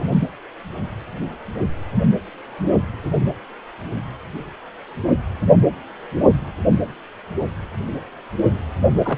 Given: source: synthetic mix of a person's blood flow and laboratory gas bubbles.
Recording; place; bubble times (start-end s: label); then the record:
Doppler ultrasound of blood flow; precordium
8.94-9.18 s: bubbles
From the record:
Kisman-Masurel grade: 112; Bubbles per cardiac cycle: 1 to 2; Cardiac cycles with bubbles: 1 to 10%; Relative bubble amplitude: moderate (0.250 to 0.450); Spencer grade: 1 (occasional bubble signal discernible with the cardiac motion signal, with majority of cardiac periods free of bubbles); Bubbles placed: anywhere in the cardiac cycle